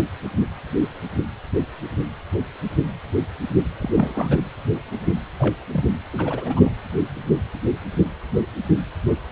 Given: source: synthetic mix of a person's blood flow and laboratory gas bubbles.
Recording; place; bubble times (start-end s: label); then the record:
Doppler ultrasound of blood flow; precordium
3.81-3.90 s: bubbles
3.94-4.43 s: bubbles
5.39-5.55 s: bubbles
5.72-5.84 s: bubbles
6.13-6.71 s: bubbles
From the record:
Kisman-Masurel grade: 221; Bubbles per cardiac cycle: several, 3 to 8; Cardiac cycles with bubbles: 10 to 50%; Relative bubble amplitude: barely perceptible (0.100 to 0.250); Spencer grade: 2 (many but less than half of the cardiac periods contain bubble signals, singularly or in groups); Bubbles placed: anywhere in the cardiac cycle